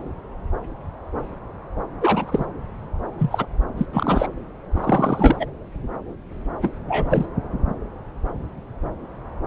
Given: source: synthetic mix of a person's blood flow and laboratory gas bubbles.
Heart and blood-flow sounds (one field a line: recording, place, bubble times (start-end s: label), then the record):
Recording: Doppler ultrasound of blood flow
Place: subclavian vein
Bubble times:
2.00-2.46 s: bubbles
3.19-3.46 s: bubbles
3.77-3.85 s: bubbles
3.92-4.27 s: bubbles
4.71-5.46 s: bubbles
6.62-6.72 s: bubbles
6.88-7.26 s: bubbles
From the record:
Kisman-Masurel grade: 223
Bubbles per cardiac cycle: several, 3 to 8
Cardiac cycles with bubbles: 10 to 50%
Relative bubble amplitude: loud (0.450 to 0.775)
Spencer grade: 2 (many but less than half of the cardiac periods contain bubble signals, singularly or in groups)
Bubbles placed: anywhere in the cardiac cycle